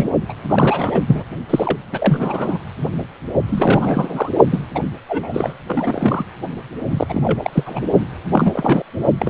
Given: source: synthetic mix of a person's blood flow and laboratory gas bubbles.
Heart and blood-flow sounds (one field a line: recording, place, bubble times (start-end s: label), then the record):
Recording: Doppler ultrasound of blood flow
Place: precordium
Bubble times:
0.00-0.08 s: bubbles
0.28-0.34 s: bubbles
0.50-1.01 s: bubbles
1.07-1.24 s: bubbles
1.49-1.78 s: bubbles
1.92-2.58 s: bubbles
3.47-4.29 s: bubbles
4.50-4.59 s: bubbles
4.74-4.81 s: bubbles
5.08-5.54 s: bubbles
5.66-6.25 s: bubbles
6.90-7.83 s: bubbles
8.32-8.83 s: bubbles
9.18-9.30 s: bubbles
From the record:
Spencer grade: 3 (all of the cardiac periods contain showers or single bubble signals, but not dominating or overriding the cardiac motion signals)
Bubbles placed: only in the low amplitude regions of the cardiac cycle